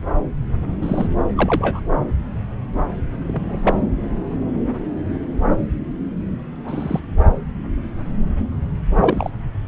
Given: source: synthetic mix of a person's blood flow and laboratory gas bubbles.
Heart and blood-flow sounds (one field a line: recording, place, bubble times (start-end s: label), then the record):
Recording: Doppler ultrasound of blood flow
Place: subclavian vein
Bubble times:
0.81-1.08 s: bubbles
1.37-1.80 s: bubbles
3.27-3.59 s: bubbles
3.63-3.85 s: bubbles
6.64-7.00 s: bubbles
8.99-9.30 s: bubbles
From the record:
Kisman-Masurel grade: 122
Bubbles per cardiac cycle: 1 to 2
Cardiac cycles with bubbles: 10 to 50%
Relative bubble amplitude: moderate (0.250 to 0.450)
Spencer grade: 2 (many but less than half of the cardiac periods contain bubble signals, singularly or in groups)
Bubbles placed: anywhere in the cardiac cycle